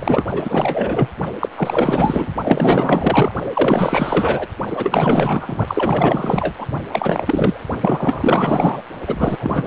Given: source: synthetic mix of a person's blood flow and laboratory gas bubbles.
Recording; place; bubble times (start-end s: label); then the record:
Doppler ultrasound of blood flow; precordium
0.00-0.24 s: bubbles
0.27-1.09 s: bubbles
1.40-1.49 s: bubbles
1.55-2.32 s: bubbles
2.44-3.31 s: bubbles
3.54-4.47 s: bubbles
4.69-5.57 s: bubbles
5.67-6.52 s: bubbles
6.58-6.66 s: bubbles
6.91-7.61 s: bubbles
7.80-8.82 s: bubbles
9.06-9.67 s: bubbles
From the record:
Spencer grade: 4 (maximum detectable bubble signal sounding continuously throughout systole and diastole of every cardiac period, and overriding the amplitude of the normal cardiac signals); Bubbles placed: only in the low amplitude regions of the cardiac cycle